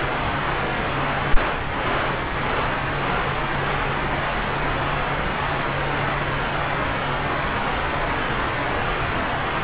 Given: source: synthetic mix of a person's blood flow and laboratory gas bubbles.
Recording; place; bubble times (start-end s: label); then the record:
Doppler ultrasound of blood flow; subclavian vein
no bubbles
From the record:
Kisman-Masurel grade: 000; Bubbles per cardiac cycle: 0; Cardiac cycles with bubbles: 0%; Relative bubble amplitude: no bubbles discernible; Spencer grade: 0 (complete lack of bubble signals)